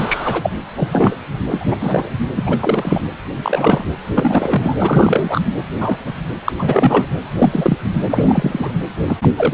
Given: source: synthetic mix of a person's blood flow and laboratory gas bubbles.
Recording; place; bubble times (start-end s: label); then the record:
Doppler ultrasound of blood flow; precordium
0.00-0.50 s: bubbles
0.77-0.89 s: bubbles
0.92-1.16 s: bubbles
1.49-1.75 s: bubbles
1.80-2.09 s: bubbles
2.36-3.01 s: bubbles
3.43-3.85 s: bubbles
4.13-4.75 s: bubbles
4.78-5.41 s: bubbles
5.80-5.99 s: bubbles
6.04-6.14 s: bubbles
6.45-6.53 s: bubbles
6.59-7.06 s: bubbles
7.38-7.78 s: bubbles
8.10-8.72 s: bubbles
9.07-9.17 s: bubbles
9.21-9.29 s: bubbles
9.38-9.54 s: bubbles
From the record:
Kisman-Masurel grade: 243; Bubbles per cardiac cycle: several, 3 to 8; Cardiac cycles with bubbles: 100%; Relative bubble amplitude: loud (0.450 to 0.775); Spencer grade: 3 (all of the cardiac periods contain showers or single bubble signals, but not dominating or overriding the cardiac motion signals); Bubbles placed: anywhere in the cardiac cycle